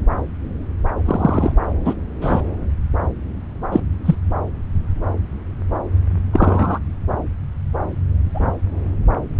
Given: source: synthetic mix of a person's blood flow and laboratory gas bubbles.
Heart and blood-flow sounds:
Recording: Doppler ultrasound of blood flow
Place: subclavian vein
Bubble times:
1.05-1.53 s: bubbles
1.84-1.95 s: bubbles
2.21-2.42 s: bubbles
3.72-3.80 s: bubbles
4.05-4.15 s: bubbles
6.33-6.79 s: bubbles
8.34-8.52 s: bubbles
From the record:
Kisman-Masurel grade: 123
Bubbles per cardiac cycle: 1 to 2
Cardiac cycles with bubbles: 10 to 50%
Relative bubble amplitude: loud (0.450 to 0.775)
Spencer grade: 2 (many but less than half of the cardiac periods contain bubble signals, singularly or in groups)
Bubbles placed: anywhere in the cardiac cycle

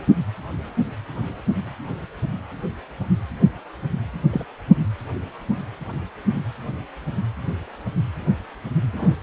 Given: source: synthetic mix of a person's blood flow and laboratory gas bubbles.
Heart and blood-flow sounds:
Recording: Doppler ultrasound of blood flow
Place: precordium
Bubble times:
4.33-4.45 s: bubbles
8.93-9.15 s: bubbles
From the record:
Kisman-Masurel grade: 122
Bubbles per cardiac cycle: 1 to 2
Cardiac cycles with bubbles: 10 to 50%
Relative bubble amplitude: moderate (0.250 to 0.450)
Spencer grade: 2 (many but less than half of the cardiac periods contain bubble signals, singularly or in groups)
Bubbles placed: anywhere in the cardiac cycle

